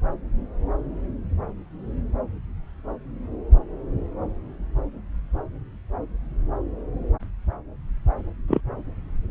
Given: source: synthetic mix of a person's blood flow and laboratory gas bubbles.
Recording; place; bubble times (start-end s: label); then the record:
Doppler ultrasound of blood flow; subclavian vein
8.48-8.61 s: bubbles
From the record:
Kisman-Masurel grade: 112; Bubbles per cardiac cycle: 1 to 2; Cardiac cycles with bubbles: 1 to 10%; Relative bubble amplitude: moderate (0.250 to 0.450); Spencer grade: 1 (occasional bubble signal discernible with the cardiac motion signal, with majority of cardiac periods free of bubbles); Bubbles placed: anywhere in the cardiac cycle